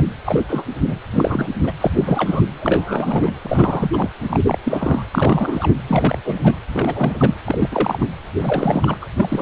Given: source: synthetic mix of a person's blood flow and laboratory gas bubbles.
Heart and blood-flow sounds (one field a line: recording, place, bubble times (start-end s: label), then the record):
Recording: Doppler ultrasound of blood flow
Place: precordium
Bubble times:
0.00-0.03 s: bubbles
0.25-0.45 s: bubbles
0.48-0.63 s: bubbles
0.87-0.96 s: bubbles
1.10-1.50 s: bubbles
1.63-1.72 s: bubbles
1.80-1.91 s: bubbles
1.95-2.41 s: bubbles
2.60-3.32 s: bubbles
3.41-4.11 s: bubbles
4.29-4.40 s: bubbles
4.46-4.58 s: bubbles
4.64-5.03 s: bubbles
5.14-5.76 s: bubbles
5.87-6.19 s: bubbles
6.25-6.59 s: bubbles
6.73-7.34 s: bubbles
7.45-7.69 s: bubbles
7.71-8.06 s: bubbles
8.38-8.97 s: bubbles
9.01-9.05 s: bubbles
9.15-9.42 s: bubbles
From the record:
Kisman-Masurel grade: 342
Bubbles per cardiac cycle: rolling drumbeat, 9 or more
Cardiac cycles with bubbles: 100%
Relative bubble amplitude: moderate (0.250 to 0.450)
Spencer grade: 3 (all of the cardiac periods contain showers or single bubble signals, but not dominating or overriding the cardiac motion signals)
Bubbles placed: anywhere in the cardiac cycle